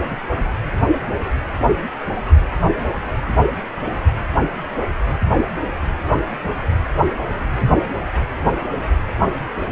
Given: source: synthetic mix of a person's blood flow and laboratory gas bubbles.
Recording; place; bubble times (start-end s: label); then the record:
Doppler ultrasound of blood flow; precordium
no bubbles
From the record:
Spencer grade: 0 (complete lack of bubble signals)